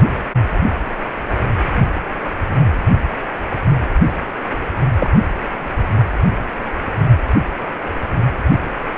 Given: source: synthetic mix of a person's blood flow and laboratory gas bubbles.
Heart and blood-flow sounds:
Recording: Doppler ultrasound of blood flow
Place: precordium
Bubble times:
4.99-5.10 s: bubbles
From the record:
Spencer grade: 1 (occasional bubble signal discernible with the cardiac motion signal, with majority of cardiac periods free of bubbles)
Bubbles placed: anywhere in the cardiac cycle

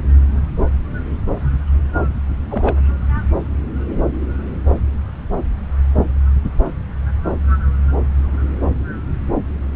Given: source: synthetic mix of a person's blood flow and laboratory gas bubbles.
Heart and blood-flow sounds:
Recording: Doppler ultrasound of blood flow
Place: subclavian vein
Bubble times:
2.48-2.77 s: bubbles
From the record:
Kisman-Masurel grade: 212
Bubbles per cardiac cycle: several, 3 to 8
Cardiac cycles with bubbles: 1 to 10%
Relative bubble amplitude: moderate (0.250 to 0.450)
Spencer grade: 1 (occasional bubble signal discernible with the cardiac motion signal, with majority of cardiac periods free of bubbles)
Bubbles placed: anywhere in the cardiac cycle

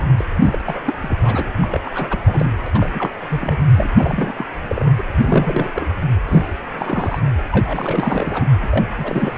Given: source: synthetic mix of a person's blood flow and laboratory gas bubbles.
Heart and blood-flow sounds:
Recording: Doppler ultrasound of blood flow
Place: precordium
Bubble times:
0.00-0.04 s: bubbles
0.17-0.24 s: bubbles
0.42-0.82 s: bubbles
0.84-0.94 s: bubbles
1.01-1.16 s: bubbles
1.21-1.51 s: bubbles
1.61-1.68 s: bubbles
1.72-1.78 s: bubbles
1.84-2.08 s: bubbles
2.10-2.17 s: bubbles
2.26-2.49 s: bubbles
2.66-2.72 s: bubbles
2.74-2.89 s: bubbles
2.92-3.10 s: bubbles
3.29-3.58 s: bubbles
3.77-3.88 s: bubbles
3.97-4.33 s: bubbles
4.38-4.45 s: bubbles
4.68-4.89 s: bubbles
4.97-5.04 s: bubbles
5.18-5.85 s: bubbles
6.26-6.58 s: bubbles
6.77-7.20 s: bubbles
7.51-8.46 s: bubbles
8.62-8.87 s: bubbles
8.97-9.38 s: bubbles
From the record:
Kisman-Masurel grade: 342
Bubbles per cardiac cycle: rolling drumbeat, 9 or more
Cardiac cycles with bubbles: 100%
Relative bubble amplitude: moderate (0.250 to 0.450)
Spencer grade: 3 (all of the cardiac periods contain showers or single bubble signals, but not dominating or overriding the cardiac motion signals)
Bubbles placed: anywhere in the cardiac cycle

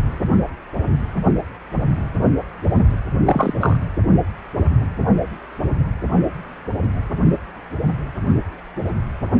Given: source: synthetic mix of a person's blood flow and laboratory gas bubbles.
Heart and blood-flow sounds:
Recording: Doppler ultrasound of blood flow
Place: precordium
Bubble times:
3.26-3.53 s: bubbles
3.60-3.78 s: bubbles
From the record:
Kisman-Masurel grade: 113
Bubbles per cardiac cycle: 1 to 2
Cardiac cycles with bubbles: 1 to 10%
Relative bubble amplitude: loud (0.450 to 0.775)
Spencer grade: 1 (occasional bubble signal discernible with the cardiac motion signal, with majority of cardiac periods free of bubbles)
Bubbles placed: only in the low amplitude regions of the cardiac cycle

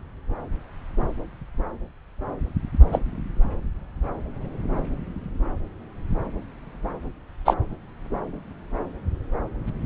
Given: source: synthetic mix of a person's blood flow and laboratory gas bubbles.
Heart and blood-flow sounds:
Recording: Doppler ultrasound of blood flow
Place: subclavian vein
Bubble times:
2.92-2.99 s: bubbles
7.45-7.54 s: bubbles
From the record:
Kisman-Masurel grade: 113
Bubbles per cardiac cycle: 1 to 2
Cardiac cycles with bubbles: 1 to 10%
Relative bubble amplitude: loud (0.450 to 0.775)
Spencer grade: 1 (occasional bubble signal discernible with the cardiac motion signal, with majority of cardiac periods free of bubbles)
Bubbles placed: anywhere in the cardiac cycle

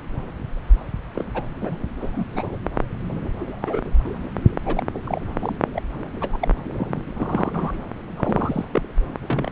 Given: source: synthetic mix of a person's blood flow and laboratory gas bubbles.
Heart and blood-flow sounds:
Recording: Doppler ultrasound of blood flow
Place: subclavian vein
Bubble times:
1.16-1.25 s: bubbles
1.34-1.42 s: bubbles
1.61-1.77 s: bubbles
2.02-2.24 s: bubbles
2.35-2.57 s: bubbles
3.39-3.81 s: bubbles
3.85-3.91 s: bubbles
4.66-4.82 s: bubbles
4.95-5.00 s: bubbles
5.05-5.20 s: bubbles
5.38-5.55 s: bubbles
5.74-5.81 s: bubbles
6.21-6.29 s: bubbles
6.33-6.37 s: bubbles
6.40-6.48 s: bubbles
6.71-7.00 s: bubbles
7.15-7.78 s: bubbles
8.16-8.65 s: bubbles
8.72-8.81 s: bubbles
9.21-9.52 s: bubbles
From the record:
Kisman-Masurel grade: 242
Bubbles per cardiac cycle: several, 3 to 8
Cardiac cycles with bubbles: 100%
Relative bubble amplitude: moderate (0.250 to 0.450)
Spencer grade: 3 (all of the cardiac periods contain showers or single bubble signals, but not dominating or overriding the cardiac motion signals)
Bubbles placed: anywhere in the cardiac cycle

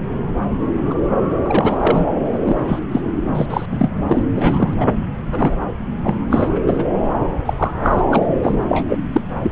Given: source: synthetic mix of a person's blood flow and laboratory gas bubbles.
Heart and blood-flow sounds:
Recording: Doppler ultrasound of blood flow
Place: subclavian vein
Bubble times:
0.90-0.95 s: bubbles
1.43-1.77 s: bubbles
1.80-2.06 s: bubbles
2.31-2.79 s: bubbles
2.92-3.01 s: bubbles
3.25-3.66 s: bubbles
3.71-3.90 s: bubbles
4.08-4.24 s: bubbles
4.36-4.74 s: bubbles
4.80-4.86 s: bubbles
5.32-5.56 s: bubbles
6.03-6.15 s: bubbles
6.31-6.59 s: bubbles
6.67-6.84 s: bubbles
7.46-7.54 s: bubbles
7.56-7.72 s: bubbles
7.83-8.03 s: bubbles
8.10-8.22 s: bubbles
8.42-8.57 s: bubbles
8.68-8.99 s: bubbles
9.12-9.21 s: bubbles
9.42-9.51 s: bubbles
From the record:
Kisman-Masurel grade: 233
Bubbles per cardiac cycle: several, 3 to 8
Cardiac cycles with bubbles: 50 to 99%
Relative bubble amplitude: loud (0.450 to 0.775)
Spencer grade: 3 (all of the cardiac periods contain showers or single bubble signals, but not dominating or overriding the cardiac motion signals)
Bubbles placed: anywhere in the cardiac cycle

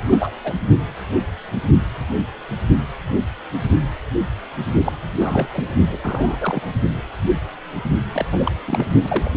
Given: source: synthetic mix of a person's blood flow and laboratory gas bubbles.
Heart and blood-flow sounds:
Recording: Doppler ultrasound of blood flow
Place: precordium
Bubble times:
0.00-0.31 s: bubbles
0.43-0.53 s: bubbles
4.84-4.92 s: bubbles
5.19-5.48 s: bubbles
5.52-5.64 s: bubbles
5.92-5.97 s: bubbles
6.02-6.62 s: bubbles
8.13-8.25 s: bubbles
8.32-8.52 s: bubbles
8.67-8.86 s: bubbles
9.03-9.37 s: bubbles
From the record:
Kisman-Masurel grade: 232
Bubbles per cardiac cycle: several, 3 to 8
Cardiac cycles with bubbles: 50 to 99%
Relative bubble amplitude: moderate (0.250 to 0.450)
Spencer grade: 3 (all of the cardiac periods contain showers or single bubble signals, but not dominating or overriding the cardiac motion signals)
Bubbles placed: only in the low amplitude regions of the cardiac cycle

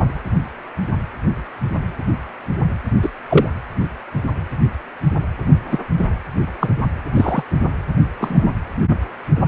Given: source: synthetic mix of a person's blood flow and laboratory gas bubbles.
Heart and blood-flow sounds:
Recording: Doppler ultrasound of blood flow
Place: precordium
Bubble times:
3.02-3.10 s: bubbles
3.29-3.49 s: bubbles
5.71-5.79 s: bubbles
5.98-6.08 s: bubbles
6.60-6.74 s: bubbles
7.15-7.43 s: bubbles
8.18-8.50 s: bubbles
From the record:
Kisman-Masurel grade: 123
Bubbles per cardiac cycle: 1 to 2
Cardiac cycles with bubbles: 10 to 50%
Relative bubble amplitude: loud (0.450 to 0.775)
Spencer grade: 2 (many but less than half of the cardiac periods contain bubble signals, singularly or in groups)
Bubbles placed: anywhere in the cardiac cycle

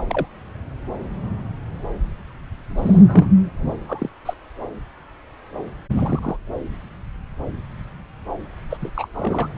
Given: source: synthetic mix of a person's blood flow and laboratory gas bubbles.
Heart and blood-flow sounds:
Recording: Doppler ultrasound of blood flow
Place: subclavian vein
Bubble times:
0.00-0.04 s: bubbles
0.08-0.26 s: bubbles
2.77-3.29 s: bubbles
3.87-4.09 s: bubbles
4.25-4.33 s: bubbles
5.91-6.37 s: bubbles
8.70-8.77 s: bubbles
8.82-8.90 s: bubbles
8.94-9.08 s: bubbles
9.13-9.49 s: bubbles
From the record:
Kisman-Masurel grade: 221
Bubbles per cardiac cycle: several, 3 to 8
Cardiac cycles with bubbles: 10 to 50%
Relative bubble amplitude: barely perceptible (0.100 to 0.250)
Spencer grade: 2 (many but less than half of the cardiac periods contain bubble signals, singularly or in groups)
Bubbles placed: anywhere in the cardiac cycle

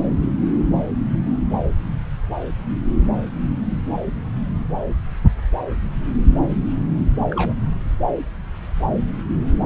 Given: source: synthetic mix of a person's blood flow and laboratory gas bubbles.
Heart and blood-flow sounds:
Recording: Doppler ultrasound of blood flow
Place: subclavian vein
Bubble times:
7.31-7.53 s: bubbles
From the record:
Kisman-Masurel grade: 112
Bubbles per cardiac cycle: 1 to 2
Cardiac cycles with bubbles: 1 to 10%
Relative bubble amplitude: moderate (0.250 to 0.450)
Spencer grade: 1 (occasional bubble signal discernible with the cardiac motion signal, with majority of cardiac periods free of bubbles)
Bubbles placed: anywhere in the cardiac cycle

